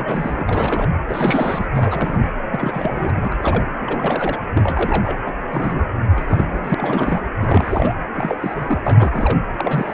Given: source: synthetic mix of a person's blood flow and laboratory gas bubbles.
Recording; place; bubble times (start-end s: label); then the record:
Doppler ultrasound of blood flow; precordium
0.00-0.45 s: bubbles
0.48-0.90 s: bubbles
1.08-1.67 s: bubbles
1.72-2.29 s: bubbles
2.50-3.10 s: bubbles
3.13-3.71 s: bubbles
3.80-4.39 s: bubbles
4.54-5.18 s: bubbles
5.25-5.33 s: bubbles
5.51-5.89 s: bubbles
6.11-6.75 s: bubbles
6.78-7.21 s: bubbles
7.40-7.95 s: bubbles
8.14-8.81 s: bubbles
8.86-9.40 s: bubbles
9.57-9.94 s: bubbles
From the record:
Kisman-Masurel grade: 332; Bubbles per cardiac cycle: rolling drumbeat, 9 or more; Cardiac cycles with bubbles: 50 to 99%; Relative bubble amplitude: moderate (0.250 to 0.450); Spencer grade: 3 (all of the cardiac periods contain showers or single bubble signals, but not dominating or overriding the cardiac motion signals); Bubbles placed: anywhere in the cardiac cycle